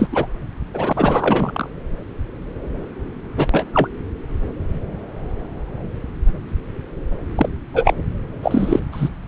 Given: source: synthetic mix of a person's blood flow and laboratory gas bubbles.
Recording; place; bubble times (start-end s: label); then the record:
Doppler ultrasound of blood flow; subclavian vein
0.00-0.08 s: bubbles
0.11-0.27 s: bubbles
0.73-1.69 s: bubbles
3.37-3.47 s: bubbles
3.52-3.65 s: bubbles
3.73-3.88 s: bubbles
7.36-7.49 s: bubbles
7.73-7.94 s: bubbles
8.43-8.79 s: bubbles
8.92-9.10 s: bubbles
From the record:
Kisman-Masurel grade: 223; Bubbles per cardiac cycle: several, 3 to 8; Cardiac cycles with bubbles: 10 to 50%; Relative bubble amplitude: loud (0.450 to 0.775); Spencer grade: 2 (many but less than half of the cardiac periods contain bubble signals, singularly or in groups); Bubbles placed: anywhere in the cardiac cycle